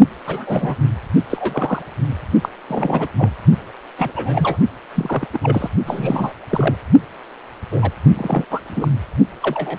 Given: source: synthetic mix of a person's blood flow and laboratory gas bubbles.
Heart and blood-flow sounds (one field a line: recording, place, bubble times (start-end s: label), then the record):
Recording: Doppler ultrasound of blood flow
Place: precordium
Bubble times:
0.27-0.76 s: bubbles
1.30-1.82 s: bubbles
2.43-2.50 s: bubbles
2.68-3.08 s: bubbles
3.18-3.29 s: bubbles
3.97-4.12 s: bubbles
4.15-4.58 s: bubbles
4.95-5.26 s: bubbles
5.33-5.38 s: bubbles
5.42-5.69 s: bubbles
5.86-6.33 s: bubbles
6.51-6.75 s: bubbles
7.71-7.91 s: bubbles
8.17-8.45 s: bubbles
8.50-8.60 s: bubbles
8.69-8.88 s: bubbles
9.42-9.78 s: bubbles
From the record:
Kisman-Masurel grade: 242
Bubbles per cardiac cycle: several, 3 to 8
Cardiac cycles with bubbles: 100%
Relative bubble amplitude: moderate (0.250 to 0.450)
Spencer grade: 3 (all of the cardiac periods contain showers or single bubble signals, but not dominating or overriding the cardiac motion signals)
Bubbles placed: only in the low amplitude regions of the cardiac cycle